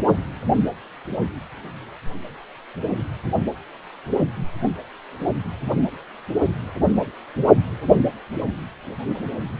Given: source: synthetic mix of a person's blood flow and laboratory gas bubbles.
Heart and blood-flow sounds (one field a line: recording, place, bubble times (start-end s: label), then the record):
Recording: Doppler ultrasound of blood flow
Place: precordium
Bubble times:
no bubbles
From the record:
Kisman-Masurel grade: 000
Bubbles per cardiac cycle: 0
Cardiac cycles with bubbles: 0%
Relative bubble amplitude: no bubbles discernible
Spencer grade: 0 (complete lack of bubble signals)